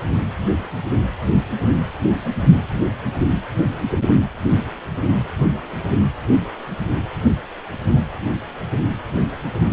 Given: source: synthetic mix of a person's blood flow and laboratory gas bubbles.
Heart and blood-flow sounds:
Doppler ultrasound of blood flow; precordium
no bubbles
From the record:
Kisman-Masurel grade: 000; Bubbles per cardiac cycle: 0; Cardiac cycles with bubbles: 0%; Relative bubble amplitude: no bubbles discernible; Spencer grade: 0 (complete lack of bubble signals)

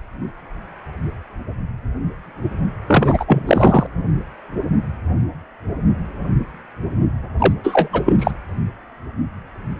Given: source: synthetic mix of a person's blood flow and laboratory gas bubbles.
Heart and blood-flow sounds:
Doppler ultrasound of blood flow; precordium
2.86-3.87 s: bubbles
7.38-7.53 s: bubbles
7.63-7.88 s: bubbles
7.93-8.16 s: bubbles
8.19-8.31 s: bubbles
From the record:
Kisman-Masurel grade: 223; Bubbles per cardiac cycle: several, 3 to 8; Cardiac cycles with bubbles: 10 to 50%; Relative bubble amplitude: loud (0.450 to 0.775); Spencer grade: 2 (many but less than half of the cardiac periods contain bubble signals, singularly or in groups); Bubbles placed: anywhere in the cardiac cycle

